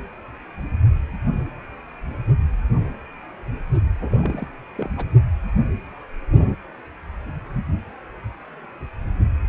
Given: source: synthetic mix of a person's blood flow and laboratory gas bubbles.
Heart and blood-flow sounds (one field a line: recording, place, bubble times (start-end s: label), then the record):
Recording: Doppler ultrasound of blood flow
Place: precordium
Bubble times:
4.00-4.46 s: bubbles
4.75-4.88 s: bubbles
4.97-5.06 s: bubbles
From the record:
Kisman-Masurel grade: 221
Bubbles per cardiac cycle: several, 3 to 8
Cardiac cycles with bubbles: 10 to 50%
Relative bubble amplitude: barely perceptible (0.100 to 0.250)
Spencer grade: 2 (many but less than half of the cardiac periods contain bubble signals, singularly or in groups)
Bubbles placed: only in the low amplitude regions of the cardiac cycle